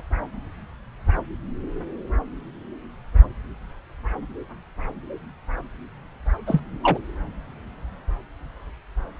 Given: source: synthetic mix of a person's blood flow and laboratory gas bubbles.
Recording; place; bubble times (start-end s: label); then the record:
Doppler ultrasound of blood flow; subclavian vein
6.46-6.60 s: bubbles
6.83-6.98 s: bubbles
From the record:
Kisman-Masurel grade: 113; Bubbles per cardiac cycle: 1 to 2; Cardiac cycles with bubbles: 1 to 10%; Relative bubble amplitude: loud (0.450 to 0.775); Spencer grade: 1 (occasional bubble signal discernible with the cardiac motion signal, with majority of cardiac periods free of bubbles); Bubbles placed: anywhere in the cardiac cycle